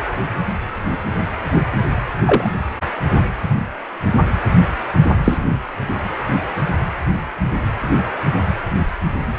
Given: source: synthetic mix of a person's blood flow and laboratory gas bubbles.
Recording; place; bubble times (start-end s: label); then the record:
Doppler ultrasound of blood flow; precordium
2.25-2.50 s: bubbles
5.23-5.38 s: bubbles
From the record:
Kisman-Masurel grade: 123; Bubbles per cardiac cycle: 1 to 2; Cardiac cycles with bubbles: 10 to 50%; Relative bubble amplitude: loud (0.450 to 0.775); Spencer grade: 2 (many but less than half of the cardiac periods contain bubble signals, singularly or in groups); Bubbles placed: anywhere in the cardiac cycle